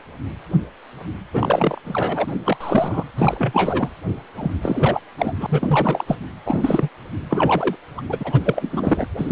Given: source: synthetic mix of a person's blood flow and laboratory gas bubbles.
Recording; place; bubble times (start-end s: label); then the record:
Doppler ultrasound of blood flow; precordium
1.33-1.81 s: bubbles
1.84-2.34 s: bubbles
2.45-2.57 s: bubbles
2.60-3.04 s: bubbles
3.16-3.89 s: bubbles
4.35-4.51 s: bubbles
4.61-5.01 s: bubbles
5.17-5.33 s: bubbles
5.38-6.04 s: bubbles
6.06-6.16 s: bubbles
6.45-6.88 s: bubbles
7.30-7.76 s: bubbles
7.97-8.02 s: bubbles
8.09-8.18 s: bubbles
8.20-8.40 s: bubbles
8.44-9.07 s: bubbles
9.18-9.32 s: bubbles
From the record:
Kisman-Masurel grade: 332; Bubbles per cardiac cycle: rolling drumbeat, 9 or more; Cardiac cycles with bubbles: 50 to 99%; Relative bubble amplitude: moderate (0.250 to 0.450); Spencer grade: 3 (all of the cardiac periods contain showers or single bubble signals, but not dominating or overriding the cardiac motion signals); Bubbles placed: anywhere in the cardiac cycle